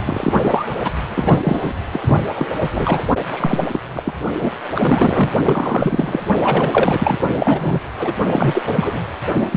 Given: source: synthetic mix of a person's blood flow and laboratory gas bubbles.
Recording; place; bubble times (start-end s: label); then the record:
Doppler ultrasound of blood flow; precordium
0.00-0.03 s: bubbles
0.06-0.31 s: bubbles
0.37-0.65 s: bubbles
0.80-0.91 s: bubbles
1.08-1.39 s: bubbles
1.43-1.73 s: bubbles
1.92-2.16 s: bubbles
2.26-2.31 s: bubbles
2.35-2.52 s: bubbles
2.62-2.69 s: bubbles
2.72-3.03 s: bubbles
3.32-3.68 s: bubbles
3.73-3.80 s: bubbles
3.95-4.16 s: bubbles
4.36-4.50 s: bubbles
4.75-5.33 s: bubbles
5.43-6.21 s: bubbles
6.43-7.18 s: bubbles
7.37-7.79 s: bubbles
7.98-8.13 s: bubbles
8.26-8.62 s: bubbles
8.65-9.00 s: bubbles
9.34-9.47 s: bubbles
9.52-9.57 s: bubbles
From the record:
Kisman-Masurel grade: 343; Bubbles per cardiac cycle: rolling drumbeat, 9 or more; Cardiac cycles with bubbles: 100%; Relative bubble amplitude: loud (0.450 to 0.775); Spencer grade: 3 (all of the cardiac periods contain showers or single bubble signals, but not dominating or overriding the cardiac motion signals); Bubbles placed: anywhere in the cardiac cycle